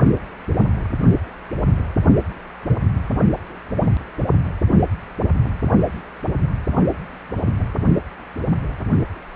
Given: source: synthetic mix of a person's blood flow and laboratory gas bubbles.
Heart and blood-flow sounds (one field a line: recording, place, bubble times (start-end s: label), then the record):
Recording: Doppler ultrasound of blood flow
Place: precordium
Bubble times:
no bubbles
From the record:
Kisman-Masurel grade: 000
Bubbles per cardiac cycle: 0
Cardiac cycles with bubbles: 0%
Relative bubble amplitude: no bubbles discernible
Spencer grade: 0 (complete lack of bubble signals)